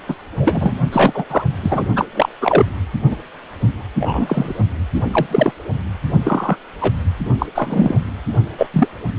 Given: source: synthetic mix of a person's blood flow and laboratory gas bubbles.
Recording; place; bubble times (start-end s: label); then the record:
Doppler ultrasound of blood flow; precordium
0.08-0.15 s: bubbles
0.40-0.77 s: bubbles
0.92-1.26 s: bubbles
1.30-1.44 s: bubbles
1.63-1.84 s: bubbles
1.96-2.05 s: bubbles
2.15-2.29 s: bubbles
2.40-2.66 s: bubbles
3.10-3.17 s: bubbles
3.97-4.54 s: bubbles
4.93-5.02 s: bubbles
5.13-5.27 s: bubbles
5.30-5.51 s: bubbles
6.24-6.56 s: bubbles
6.81-6.93 s: bubbles
7.39-7.46 s: bubbles
7.54-8.00 s: bubbles
8.57-8.67 s: bubbles
8.73-8.88 s: bubbles
From the record:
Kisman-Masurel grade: 243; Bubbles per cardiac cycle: several, 3 to 8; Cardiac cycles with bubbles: 100%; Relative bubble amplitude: loud (0.450 to 0.775); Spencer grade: 3 (all of the cardiac periods contain showers or single bubble signals, but not dominating or overriding the cardiac motion signals); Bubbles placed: only in the low amplitude regions of the cardiac cycle